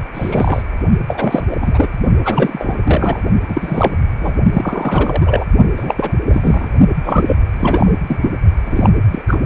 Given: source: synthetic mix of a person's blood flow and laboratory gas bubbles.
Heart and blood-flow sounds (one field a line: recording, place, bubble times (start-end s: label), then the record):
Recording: Doppler ultrasound of blood flow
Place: precordium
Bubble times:
0.15-0.62 s: bubbles
1.07-1.45 s: bubbles
1.50-1.56 s: bubbles
1.60-1.88 s: bubbles
2.25-2.78 s: bubbles
2.83-3.22 s: bubbles
3.48-3.92 s: bubbles
4.20-4.34 s: bubbles
4.53-5.45 s: bubbles
5.77-6.12 s: bubbles
6.29-6.69 s: bubbles
7.04-7.37 s: bubbles
7.59-7.92 s: bubbles
8.07-8.19 s: bubbles
8.22-8.31 s: bubbles
8.65-8.90 s: bubbles
9.07-9.22 s: bubbles
9.27-9.36 s: bubbles
9.41-9.46 s: bubbles
From the record:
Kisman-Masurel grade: 343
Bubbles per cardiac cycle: rolling drumbeat, 9 or more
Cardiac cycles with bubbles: 100%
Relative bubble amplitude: loud (0.450 to 0.775)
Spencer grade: 3 (all of the cardiac periods contain showers or single bubble signals, but not dominating or overriding the cardiac motion signals)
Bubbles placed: only in the low amplitude regions of the cardiac cycle